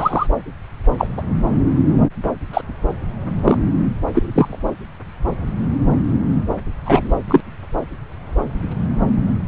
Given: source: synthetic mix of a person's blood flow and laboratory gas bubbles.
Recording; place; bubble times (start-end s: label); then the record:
Doppler ultrasound of blood flow; subclavian vein
0.00-0.27 s: bubbles
0.97-1.07 s: bubbles
1.17-1.22 s: bubbles
2.53-2.61 s: bubbles
3.44-3.58 s: bubbles
4.13-4.59 s: bubbles
6.85-7.13 s: bubbles
7.28-7.41 s: bubbles
From the record:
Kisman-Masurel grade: 123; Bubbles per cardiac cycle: 1 to 2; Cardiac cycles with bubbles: 10 to 50%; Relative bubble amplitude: loud (0.450 to 0.775); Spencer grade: 2 (many but less than half of the cardiac periods contain bubble signals, singularly or in groups); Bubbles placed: anywhere in the cardiac cycle